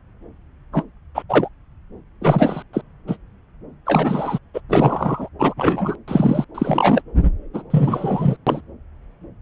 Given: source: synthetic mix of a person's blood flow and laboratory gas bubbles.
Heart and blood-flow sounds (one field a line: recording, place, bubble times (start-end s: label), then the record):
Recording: Doppler ultrasound of blood flow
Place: subclavian vein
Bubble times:
0.72-0.84 s: bubbles
1.15-1.23 s: bubbles
1.29-1.49 s: bubbles
2.21-2.62 s: bubbles
2.73-2.82 s: bubbles
3.08-3.17 s: bubbles
3.86-4.39 s: bubbles
4.54-4.61 s: bubbles
4.69-5.29 s: bubbles
5.39-5.54 s: bubbles
5.57-5.96 s: bubbles
6.08-6.45 s: bubbles
6.54-7.02 s: bubbles
7.54-7.63 s: bubbles
7.70-8.37 s: bubbles
8.46-8.61 s: bubbles
From the record:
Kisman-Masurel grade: 233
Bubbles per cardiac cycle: several, 3 to 8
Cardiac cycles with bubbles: 50 to 99%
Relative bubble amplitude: loud (0.450 to 0.775)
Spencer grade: 3 (all of the cardiac periods contain showers or single bubble signals, but not dominating or overriding the cardiac motion signals)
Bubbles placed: anywhere in the cardiac cycle